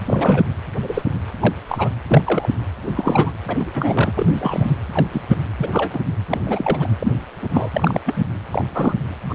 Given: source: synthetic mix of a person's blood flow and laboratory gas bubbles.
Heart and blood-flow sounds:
Doppler ultrasound of blood flow; precordium
0.06-0.43 s: bubbles
0.82-1.02 s: bubbles
1.40-1.53 s: bubbles
1.69-1.90 s: bubbles
2.08-2.21 s: bubbles
2.25-2.52 s: bubbles
2.83-2.91 s: bubbles
2.94-3.33 s: bubbles
3.48-3.57 s: bubbles
3.59-4.12 s: bubbles
4.17-4.75 s: bubbles
4.92-5.05 s: bubbles
5.12-5.22 s: bubbles
5.29-5.35 s: bubbles
5.58-6.00 s: bubbles
6.29-6.89 s: bubbles
6.99-7.12 s: bubbles
7.42-7.47 s: bubbles
7.53-7.70 s: bubbles
7.74-7.99 s: bubbles
8.06-8.24 s: bubbles
8.52-8.64 s: bubbles
8.73-8.94 s: bubbles
9.29-9.35 s: bubbles
From the record:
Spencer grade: 3 (all of the cardiac periods contain showers or single bubble signals, but not dominating or overriding the cardiac motion signals); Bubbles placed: anywhere in the cardiac cycle

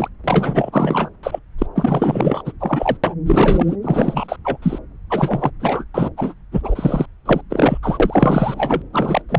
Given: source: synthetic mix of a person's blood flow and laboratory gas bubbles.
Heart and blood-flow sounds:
Doppler ultrasound of blood flow; subclavian vein
0.00-0.08 s: bubbles
0.24-1.09 s: bubbles
1.23-1.39 s: bubbles
1.58-1.67 s: bubbles
1.75-2.52 s: bubbles
2.59-2.97 s: bubbles
3.04-3.14 s: bubbles
3.26-3.76 s: bubbles
3.82-4.36 s: bubbles
4.44-4.57 s: bubbles
4.62-4.79 s: bubbles
5.09-5.50 s: bubbles
5.59-5.85 s: bubbles
5.94-6.09 s: bubbles
6.17-6.34 s: bubbles
6.51-7.06 s: bubbles
7.25-7.41 s: bubbles
7.50-7.78 s: bubbles
7.83-8.82 s: bubbles
8.93-9.22 s: bubbles
9.29-9.39 s: bubbles
From the record:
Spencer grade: 4 (maximum detectable bubble signal sounding continuously throughout systole and diastole of every cardiac period, and overriding the amplitude of the normal cardiac signals); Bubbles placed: anywhere in the cardiac cycle

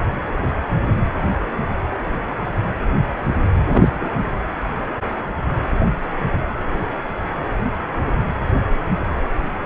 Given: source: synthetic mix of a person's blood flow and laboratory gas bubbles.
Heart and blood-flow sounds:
Doppler ultrasound of blood flow; precordium
3.70-4.09 s: bubbles
From the record:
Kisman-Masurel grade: 213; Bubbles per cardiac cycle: several, 3 to 8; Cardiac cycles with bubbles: 1 to 10%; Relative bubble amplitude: loud (0.450 to 0.775); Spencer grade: 1 (occasional bubble signal discernible with the cardiac motion signal, with majority of cardiac periods free of bubbles); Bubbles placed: anywhere in the cardiac cycle

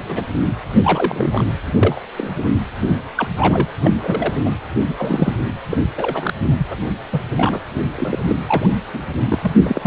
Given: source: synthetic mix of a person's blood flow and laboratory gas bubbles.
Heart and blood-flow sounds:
Doppler ultrasound of blood flow; precordium
0.08-0.22 s: bubbles
0.82-1.43 s: bubbles
1.82-2.02 s: bubbles
2.18-2.32 s: bubbles
2.81-2.92 s: bubbles
3.16-3.28 s: bubbles
3.37-3.66 s: bubbles
3.84-3.91 s: bubbles
4.04-4.33 s: bubbles
4.45-4.50 s: bubbles
4.84-4.94 s: bubbles
4.98-5.35 s: bubbles
5.70-5.77 s: bubbles
5.97-6.33 s: bubbles
6.57-6.67 s: bubbles
6.70-6.76 s: bubbles
7.12-7.22 s: bubbles
7.37-7.60 s: bubbles
7.95-8.19 s: bubbles
8.28-8.36 s: bubbles
8.46-8.69 s: bubbles
8.94-8.99 s: bubbles
9.29-9.53 s: bubbles
9.64-9.87 s: bubbles
From the record:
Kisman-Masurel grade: 242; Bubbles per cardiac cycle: several, 3 to 8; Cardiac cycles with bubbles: 100%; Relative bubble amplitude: moderate (0.250 to 0.450); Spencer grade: 3 (all of the cardiac periods contain showers or single bubble signals, but not dominating or overriding the cardiac motion signals); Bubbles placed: anywhere in the cardiac cycle

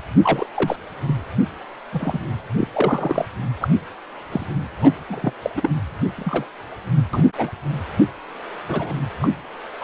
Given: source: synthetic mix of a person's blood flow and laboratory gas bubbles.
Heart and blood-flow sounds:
Doppler ultrasound of blood flow; precordium
0.23-0.46 s: bubbles
0.55-0.76 s: bubbles
1.03-1.24 s: bubbles
1.92-2.19 s: bubbles
2.57-2.68 s: bubbles
2.73-3.25 s: bubbles
3.60-3.68 s: bubbles
4.32-4.46 s: bubbles
4.81-4.93 s: bubbles
5.08-5.33 s: bubbles
5.42-5.50 s: bubbles
5.55-5.69 s: bubbles
6.17-6.45 s: bubbles
7.13-7.24 s: bubbles
7.37-7.50 s: bubbles
8.69-8.93 s: bubbles
9.22-9.30 s: bubbles
9.80-9.83 s: bubbles
From the record:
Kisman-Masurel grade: 242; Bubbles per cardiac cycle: several, 3 to 8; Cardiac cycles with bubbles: 100%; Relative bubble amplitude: moderate (0.250 to 0.450); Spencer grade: 3 (all of the cardiac periods contain showers or single bubble signals, but not dominating or overriding the cardiac motion signals); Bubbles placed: anywhere in the cardiac cycle

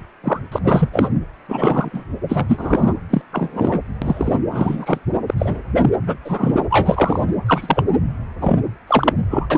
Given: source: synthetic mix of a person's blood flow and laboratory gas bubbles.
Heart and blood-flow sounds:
Doppler ultrasound of blood flow; precordium
0.23-0.40 s: bubbles
0.52-0.58 s: bubbles
0.64-0.90 s: bubbles
0.93-1.08 s: bubbles
1.49-2.05 s: bubbles
2.29-2.94 s: bubbles
3.10-3.21 s: bubbles
3.32-3.81 s: bubbles
4.01-4.35 s: bubbles
4.51-4.98 s: bubbles
5.27-5.34 s: bubbles
5.38-5.62 s: bubbles
5.80-5.89 s: bubbles
6.06-6.18 s: bubbles
6.24-6.56 s: bubbles
6.69-7.22 s: bubbles
7.46-7.84 s: bubbles
8.40-8.57 s: bubbles
8.87-9.13 s: bubbles
9.30-9.46 s: bubbles
9.50-9.58 s: bubbles
From the record:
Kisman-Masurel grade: 243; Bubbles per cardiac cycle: several, 3 to 8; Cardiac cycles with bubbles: 100%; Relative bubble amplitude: loud (0.450 to 0.775); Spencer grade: 3 (all of the cardiac periods contain showers or single bubble signals, but not dominating or overriding the cardiac motion signals); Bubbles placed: anywhere in the cardiac cycle

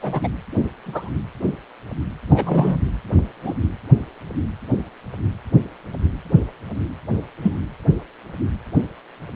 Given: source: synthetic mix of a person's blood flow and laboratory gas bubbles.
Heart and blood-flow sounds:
Doppler ultrasound of blood flow; precordium
0.01-0.30 s: bubbles
0.85-1.11 s: bubbles
2.29-2.77 s: bubbles
3.44-3.53 s: bubbles
7.43-7.56 s: bubbles
From the record:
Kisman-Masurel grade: 122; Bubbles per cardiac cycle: 1 to 2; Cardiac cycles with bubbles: 10 to 50%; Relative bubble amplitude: moderate (0.250 to 0.450); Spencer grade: 2 (many but less than half of the cardiac periods contain bubble signals, singularly or in groups); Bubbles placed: anywhere in the cardiac cycle

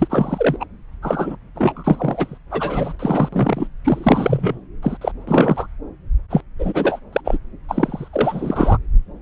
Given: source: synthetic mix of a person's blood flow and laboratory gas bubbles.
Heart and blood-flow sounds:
Doppler ultrasound of blood flow; subclavian vein
0.00-0.56 s: bubbles
0.59-0.66 s: bubbles
1.02-1.35 s: bubbles
1.54-2.38 s: bubbles
2.50-2.93 s: bubbles
2.99-3.29 s: bubbles
3.32-3.67 s: bubbles
3.84-4.58 s: bubbles
4.83-4.97 s: bubbles
5.01-5.12 s: bubbles
5.27-5.67 s: bubbles
6.30-6.42 s: bubbles
6.58-7.00 s: bubbles
7.12-7.21 s: bubbles
7.25-7.38 s: bubbles
7.68-8.08 s: bubbles
8.12-8.78 s: bubbles
From the record:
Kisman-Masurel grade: 343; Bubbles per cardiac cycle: rolling drumbeat, 9 or more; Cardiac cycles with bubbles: 100%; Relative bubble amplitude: loud (0.450 to 0.775); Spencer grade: 3 (all of the cardiac periods contain showers or single bubble signals, but not dominating or overriding the cardiac motion signals); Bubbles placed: anywhere in the cardiac cycle

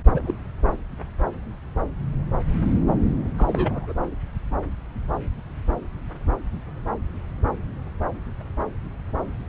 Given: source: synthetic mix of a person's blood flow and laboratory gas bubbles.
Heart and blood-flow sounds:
Doppler ultrasound of blood flow; subclavian vein
0.10-0.35 s: bubbles
3.38-3.93 s: bubbles
From the record:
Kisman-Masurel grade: 221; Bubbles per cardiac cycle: several, 3 to 8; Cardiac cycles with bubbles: 10 to 50%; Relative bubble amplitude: barely perceptible (0.100 to 0.250); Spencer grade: 2 (many but less than half of the cardiac periods contain bubble signals, singularly or in groups); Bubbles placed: anywhere in the cardiac cycle

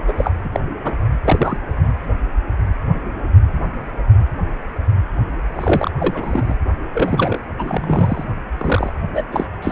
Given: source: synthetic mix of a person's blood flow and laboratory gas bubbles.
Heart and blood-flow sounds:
Doppler ultrasound of blood flow; precordium
0.08-0.13 s: bubbles
0.17-0.32 s: bubbles
0.44-0.49 s: bubbles
0.52-0.60 s: bubbles
0.84-0.95 s: bubbles
1.24-1.57 s: bubbles
5.55-5.91 s: bubbles
6.00-6.56 s: bubbles
6.93-7.38 s: bubbles
7.58-8.24 s: bubbles
8.57-8.92 s: bubbles
9.14-9.23 s: bubbles
9.32-9.46 s: bubbles
9.62-9.72 s: bubbles
From the record:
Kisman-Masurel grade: 232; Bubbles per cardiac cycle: several, 3 to 8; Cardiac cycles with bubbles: 50 to 99%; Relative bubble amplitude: moderate (0.250 to 0.450); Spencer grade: 3 (all of the cardiac periods contain showers or single bubble signals, but not dominating or overriding the cardiac motion signals); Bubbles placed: anywhere in the cardiac cycle

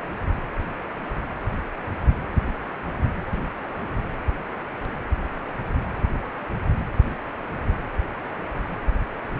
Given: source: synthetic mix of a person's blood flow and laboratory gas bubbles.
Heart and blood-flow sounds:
Doppler ultrasound of blood flow; precordium
no bubbles
From the record:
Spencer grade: 0 (complete lack of bubble signals)

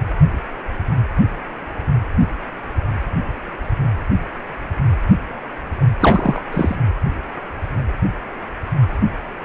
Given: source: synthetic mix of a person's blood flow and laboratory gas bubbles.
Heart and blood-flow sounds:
Doppler ultrasound of blood flow; precordium
6.00-6.43 s: bubbles
6.52-6.77 s: bubbles
From the record:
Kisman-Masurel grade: 213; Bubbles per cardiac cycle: several, 3 to 8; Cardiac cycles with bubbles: 1 to 10%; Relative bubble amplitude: loud (0.450 to 0.775); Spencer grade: 1 (occasional bubble signal discernible with the cardiac motion signal, with majority of cardiac periods free of bubbles); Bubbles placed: anywhere in the cardiac cycle

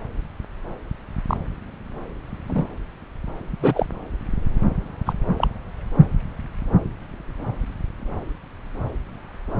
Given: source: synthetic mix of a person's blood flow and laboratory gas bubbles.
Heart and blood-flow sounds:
Doppler ultrasound of blood flow; subclavian vein
1.27-1.37 s: bubbles
2.47-2.66 s: bubbles
3.59-3.86 s: bubbles
5.06-5.13 s: bubbles
5.36-5.47 s: bubbles
From the record:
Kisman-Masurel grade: 122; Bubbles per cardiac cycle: 1 to 2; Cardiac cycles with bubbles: 10 to 50%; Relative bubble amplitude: moderate (0.250 to 0.450); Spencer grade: 2 (many but less than half of the cardiac periods contain bubble signals, singularly or in groups); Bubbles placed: anywhere in the cardiac cycle

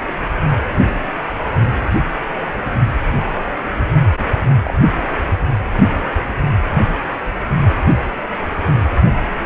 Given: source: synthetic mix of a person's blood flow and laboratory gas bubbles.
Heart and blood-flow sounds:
Doppler ultrasound of blood flow; precordium
4.19-4.24 s: bubbles
4.50-4.56 s: bubbles
4.64-4.73 s: bubbles
From the record:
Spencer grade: 1 (occasional bubble signal discernible with the cardiac motion signal, with majority of cardiac periods free of bubbles); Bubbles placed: anywhere in the cardiac cycle

